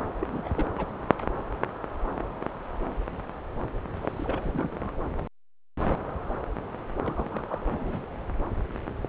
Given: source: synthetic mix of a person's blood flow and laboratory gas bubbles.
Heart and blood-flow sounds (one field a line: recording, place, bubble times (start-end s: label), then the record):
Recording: Doppler ultrasound of blood flow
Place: subclavian vein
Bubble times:
0.20-0.27 s: bubbles
0.33-0.41 s: bubbles
0.45-0.50 s: bubbles
0.53-0.66 s: bubbles
0.77-0.92 s: bubbles
3.95-4.92 s: bubbles
7.03-7.62 s: bubbles
7.65-8.03 s: bubbles
From the record:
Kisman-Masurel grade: 221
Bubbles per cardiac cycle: several, 3 to 8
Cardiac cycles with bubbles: 10 to 50%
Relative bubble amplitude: barely perceptible (0.100 to 0.250)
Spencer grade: 2 (many but less than half of the cardiac periods contain bubble signals, singularly or in groups)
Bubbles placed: anywhere in the cardiac cycle